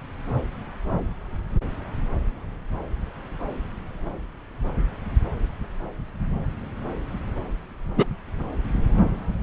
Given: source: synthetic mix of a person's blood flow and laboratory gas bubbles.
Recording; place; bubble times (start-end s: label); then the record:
Doppler ultrasound of blood flow; subclavian vein
7.97-8.05 s: bubbles
From the record:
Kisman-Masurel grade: 123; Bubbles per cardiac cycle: 1 to 2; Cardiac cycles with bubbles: 10 to 50%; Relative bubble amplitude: loud (0.450 to 0.775); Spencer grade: 2 (many but less than half of the cardiac periods contain bubble signals, singularly or in groups); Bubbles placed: anywhere in the cardiac cycle